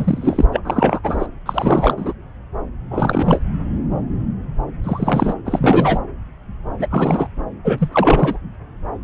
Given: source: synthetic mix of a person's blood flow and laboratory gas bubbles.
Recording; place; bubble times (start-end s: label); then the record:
Doppler ultrasound of blood flow; subclavian vein
0.00-0.45 s: bubbles
0.52-0.59 s: bubbles
0.65-1.00 s: bubbles
1.03-1.26 s: bubbles
1.46-2.13 s: bubbles
2.90-3.42 s: bubbles
4.84-5.34 s: bubbles
5.45-6.01 s: bubbles
6.79-6.87 s: bubbles
6.90-7.28 s: bubbles
7.64-7.89 s: bubbles
7.92-8.38 s: bubbles
From the record:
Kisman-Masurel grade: 333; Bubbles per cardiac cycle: rolling drumbeat, 9 or more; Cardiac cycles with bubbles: 50 to 99%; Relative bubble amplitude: loud (0.450 to 0.775); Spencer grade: 3 (all of the cardiac periods contain showers or single bubble signals, but not dominating or overriding the cardiac motion signals); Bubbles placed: anywhere in the cardiac cycle